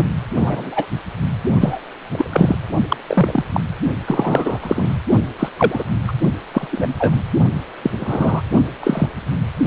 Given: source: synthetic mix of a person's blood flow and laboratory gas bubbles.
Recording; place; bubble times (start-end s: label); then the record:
Doppler ultrasound of blood flow; precordium
0.00-0.03 s: bubbles
0.40-0.87 s: bubbles
1.60-1.79 s: bubbles
2.12-2.55 s: bubbles
2.88-2.96 s: bubbles
3.07-3.43 s: bubbles
3.54-3.61 s: bubbles
4.06-4.96 s: bubbles
5.38-5.49 s: bubbles
5.56-5.83 s: bubbles
6.07-6.12 s: bubbles
6.54-6.67 s: bubbles
6.72-6.94 s: bubbles
6.99-7.16 s: bubbles
7.83-7.90 s: bubbles
8.00-8.42 s: bubbles
8.83-9.09 s: bubbles
From the record:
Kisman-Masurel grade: 243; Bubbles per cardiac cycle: several, 3 to 8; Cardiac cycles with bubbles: 100%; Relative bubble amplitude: loud (0.450 to 0.775); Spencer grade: 3 (all of the cardiac periods contain showers or single bubble signals, but not dominating or overriding the cardiac motion signals); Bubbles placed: only in the low amplitude regions of the cardiac cycle